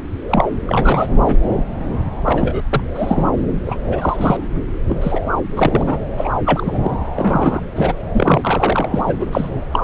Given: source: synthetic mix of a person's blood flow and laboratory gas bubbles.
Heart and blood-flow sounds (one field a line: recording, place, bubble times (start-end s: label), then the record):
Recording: Doppler ultrasound of blood flow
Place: subclavian vein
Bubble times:
0.29-0.44 s: bubbles
0.67-1.10 s: bubbles
1.27-1.35 s: bubbles
2.25-2.61 s: bubbles
2.71-2.83 s: bubbles
2.94-3.26 s: bubbles
3.65-3.77 s: bubbles
3.86-4.47 s: bubbles
4.88-4.95 s: bubbles
5.01-5.21 s: bubbles
5.56-5.98 s: bubbles
6.17-6.29 s: bubbles
6.45-6.79 s: bubbles
6.83-6.91 s: bubbles
7.16-7.62 s: bubbles
7.75-7.94 s: bubbles
8.14-8.89 s: bubbles
8.94-9.27 s: bubbles
9.31-9.50 s: bubbles
9.73-9.79 s: bubbles
From the record:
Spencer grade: 3 (all of the cardiac periods contain showers or single bubble signals, but not dominating or overriding the cardiac motion signals)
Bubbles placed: anywhere in the cardiac cycle